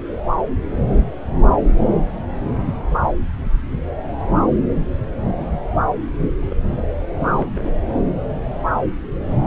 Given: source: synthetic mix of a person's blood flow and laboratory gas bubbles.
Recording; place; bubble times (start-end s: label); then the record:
Doppler ultrasound of blood flow; subclavian vein
6.42-6.54 s: bubbles
6.77-6.82 s: bubbles
7.16-7.51 s: bubbles
7.55-7.71 s: bubbles
From the record:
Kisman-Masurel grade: 211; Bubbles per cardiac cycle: several, 3 to 8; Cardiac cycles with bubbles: 1 to 10%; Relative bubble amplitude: barely perceptible (0.100 to 0.250); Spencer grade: 1 (occasional bubble signal discernible with the cardiac motion signal, with majority of cardiac periods free of bubbles); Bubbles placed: anywhere in the cardiac cycle